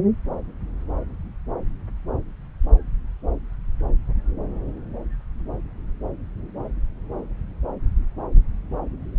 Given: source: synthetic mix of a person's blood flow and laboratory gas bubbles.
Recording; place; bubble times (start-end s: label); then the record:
Doppler ultrasound of blood flow; subclavian vein
no bubbles
From the record:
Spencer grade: 0 (complete lack of bubble signals)